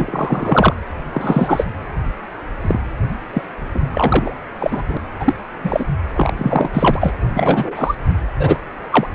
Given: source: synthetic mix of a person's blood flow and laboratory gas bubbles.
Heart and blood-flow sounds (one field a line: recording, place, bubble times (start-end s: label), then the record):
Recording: Doppler ultrasound of blood flow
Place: precordium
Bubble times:
0.00-0.74 s: bubbles
1.13-1.66 s: bubbles
2.61-2.79 s: bubbles
3.33-3.42 s: bubbles
3.74-3.81 s: bubbles
3.88-4.35 s: bubbles
4.60-4.82 s: bubbles
4.88-4.97 s: bubbles
5.20-5.35 s: bubbles
5.64-5.85 s: bubbles
6.16-6.33 s: bubbles
6.39-6.70 s: bubbles
6.73-7.17 s: bubbles
7.33-7.95 s: bubbles
8.39-8.56 s: bubbles
8.91-9.07 s: bubbles
From the record:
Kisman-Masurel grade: 243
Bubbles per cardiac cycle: several, 3 to 8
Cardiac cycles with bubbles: 100%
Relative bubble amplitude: loud (0.450 to 0.775)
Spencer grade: 3 (all of the cardiac periods contain showers or single bubble signals, but not dominating or overriding the cardiac motion signals)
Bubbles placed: anywhere in the cardiac cycle